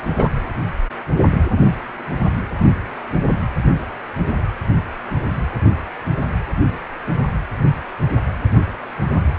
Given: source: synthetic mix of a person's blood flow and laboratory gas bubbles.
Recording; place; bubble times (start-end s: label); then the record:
Doppler ultrasound of blood flow; precordium
0.17-0.28 s: bubbles
From the record:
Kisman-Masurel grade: 223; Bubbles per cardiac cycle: several, 3 to 8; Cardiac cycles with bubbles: 10 to 50%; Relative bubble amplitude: loud (0.450 to 0.775); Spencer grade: 2 (many but less than half of the cardiac periods contain bubble signals, singularly or in groups); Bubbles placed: anywhere in the cardiac cycle